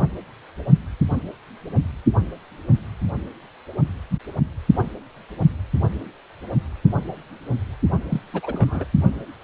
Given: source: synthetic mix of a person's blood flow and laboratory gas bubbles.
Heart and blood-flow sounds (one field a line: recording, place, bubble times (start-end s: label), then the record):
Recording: Doppler ultrasound of blood flow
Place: precordium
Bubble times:
8.11-8.21 s: bubbles
8.32-8.85 s: bubbles
From the record:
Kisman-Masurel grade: 211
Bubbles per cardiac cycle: several, 3 to 8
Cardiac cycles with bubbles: 1 to 10%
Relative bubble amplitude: barely perceptible (0.100 to 0.250)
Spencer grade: 1 (occasional bubble signal discernible with the cardiac motion signal, with majority of cardiac periods free of bubbles)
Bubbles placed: only in the low amplitude regions of the cardiac cycle